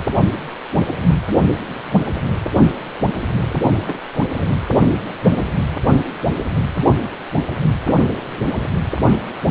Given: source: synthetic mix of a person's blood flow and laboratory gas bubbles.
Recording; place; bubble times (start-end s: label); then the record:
Doppler ultrasound of blood flow; precordium
3.85-3.99 s: bubbles
4.37-4.47 s: bubbles
From the record:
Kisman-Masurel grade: 211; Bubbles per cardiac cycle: several, 3 to 8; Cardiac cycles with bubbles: 1 to 10%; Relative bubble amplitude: barely perceptible (0.100 to 0.250); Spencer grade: 1 (occasional bubble signal discernible with the cardiac motion signal, with majority of cardiac periods free of bubbles); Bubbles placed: anywhere in the cardiac cycle